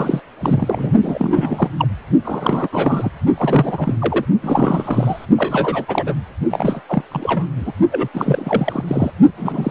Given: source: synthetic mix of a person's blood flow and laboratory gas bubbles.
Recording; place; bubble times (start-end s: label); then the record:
Doppler ultrasound of blood flow; precordium
0.00-0.21 s: bubbles
0.39-0.93 s: bubbles
1.03-1.70 s: bubbles
1.77-1.88 s: bubbles
2.25-2.68 s: bubbles
2.71-3.10 s: bubbles
3.34-3.95 s: bubbles
3.98-4.25 s: bubbles
4.42-5.26 s: bubbles
5.37-5.85 s: bubbles
5.88-6.14 s: bubbles
6.51-6.81 s: bubbles
6.89-7.03 s: bubbles
7.11-7.45 s: bubbles
7.57-7.72 s: bubbles
7.91-8.08 s: bubbles
8.14-8.83 s: bubbles
8.87-9.11 s: bubbles
9.38-9.71 s: bubbles
From the record:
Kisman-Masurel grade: 342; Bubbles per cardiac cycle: rolling drumbeat, 9 or more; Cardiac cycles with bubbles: 100%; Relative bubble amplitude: moderate (0.250 to 0.450); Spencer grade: 3 (all of the cardiac periods contain showers or single bubble signals, but not dominating or overriding the cardiac motion signals); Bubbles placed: only in the low amplitude regions of the cardiac cycle